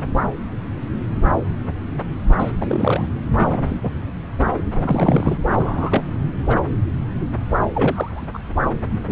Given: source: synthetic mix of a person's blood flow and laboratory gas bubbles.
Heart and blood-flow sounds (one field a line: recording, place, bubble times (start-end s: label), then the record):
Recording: Doppler ultrasound of blood flow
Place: subclavian vein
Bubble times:
2.39-2.52 s: bubbles
2.59-3.06 s: bubbles
3.35-3.90 s: bubbles
4.75-5.38 s: bubbles
5.55-6.02 s: bubbles
6.46-6.56 s: bubbles
7.74-8.28 s: bubbles
8.34-8.39 s: bubbles
9.07-9.12 s: bubbles
From the record:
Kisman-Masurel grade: 232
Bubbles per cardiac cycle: several, 3 to 8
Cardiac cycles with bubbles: 50 to 99%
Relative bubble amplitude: moderate (0.250 to 0.450)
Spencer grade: 3 (all of the cardiac periods contain showers or single bubble signals, but not dominating or overriding the cardiac motion signals)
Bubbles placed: anywhere in the cardiac cycle